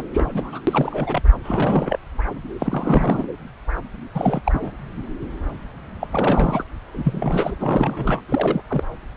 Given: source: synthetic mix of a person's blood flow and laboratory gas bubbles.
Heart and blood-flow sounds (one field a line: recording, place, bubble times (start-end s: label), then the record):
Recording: Doppler ultrasound of blood flow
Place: subclavian vein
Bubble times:
0.00-0.03 s: bubbles
0.13-0.61 s: bubbles
0.67-1.22 s: bubbles
1.44-1.99 s: bubbles
2.59-3.27 s: bubbles
4.13-4.71 s: bubbles
6.00-6.08 s: bubbles
6.11-6.64 s: bubbles
6.94-7.56 s: bubbles
7.60-8.21 s: bubbles
8.29-8.62 s: bubbles
8.68-8.84 s: bubbles
From the record:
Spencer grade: 3 (all of the cardiac periods contain showers or single bubble signals, but not dominating or overriding the cardiac motion signals)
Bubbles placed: anywhere in the cardiac cycle